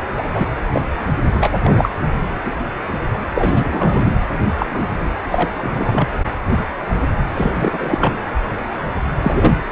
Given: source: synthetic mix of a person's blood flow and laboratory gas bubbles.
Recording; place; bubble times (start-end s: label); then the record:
Doppler ultrasound of blood flow; precordium
0.16-0.22 s: bubbles
0.34-0.47 s: bubbles
0.72-0.81 s: bubbles
1.29-1.48 s: bubbles
1.63-1.91 s: bubbles
2.45-2.52 s: bubbles
3.35-4.15 s: bubbles
4.29-4.38 s: bubbles
4.58-4.66 s: bubbles
4.71-5.16 s: bubbles
5.30-5.50 s: bubbles
5.60-6.08 s: bubbles
7.34-8.17 s: bubbles
9.21-9.56 s: bubbles
From the record:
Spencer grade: 3 (all of the cardiac periods contain showers or single bubble signals, but not dominating or overriding the cardiac motion signals); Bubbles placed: anywhere in the cardiac cycle